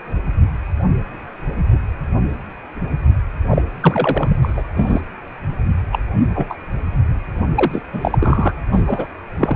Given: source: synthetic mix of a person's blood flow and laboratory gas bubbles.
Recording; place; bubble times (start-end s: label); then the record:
Doppler ultrasound of blood flow; precordium
3.51-3.62 s: bubbles
3.81-4.40 s: bubbles
4.42-4.62 s: bubbles
4.74-5.01 s: bubbles
5.92-5.99 s: bubbles
6.34-6.55 s: bubbles
7.54-7.81 s: bubbles
7.92-8.52 s: bubbles
8.72-9.07 s: bubbles
9.38-9.55 s: bubbles
From the record:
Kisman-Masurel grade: 233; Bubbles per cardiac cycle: several, 3 to 8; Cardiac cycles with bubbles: 50 to 99%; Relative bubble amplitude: loud (0.450 to 0.775); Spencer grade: 3 (all of the cardiac periods contain showers or single bubble signals, but not dominating or overriding the cardiac motion signals); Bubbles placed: anywhere in the cardiac cycle